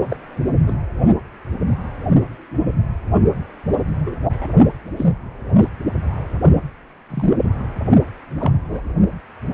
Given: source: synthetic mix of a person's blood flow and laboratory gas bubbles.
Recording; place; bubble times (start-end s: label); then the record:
Doppler ultrasound of blood flow; precordium
0.09-0.16 s: bubbles
0.67-0.76 s: bubbles
4.06-4.17 s: bubbles
4.25-4.47 s: bubbles
4.97-5.04 s: bubbles
5.59-5.69 s: bubbles
7.10-7.35 s: bubbles
7.44-7.49 s: bubbles
8.38-8.52 s: bubbles
8.68-8.80 s: bubbles
From the record:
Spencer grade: 2 (many but less than half of the cardiac periods contain bubble signals, singularly or in groups); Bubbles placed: only in the low amplitude regions of the cardiac cycle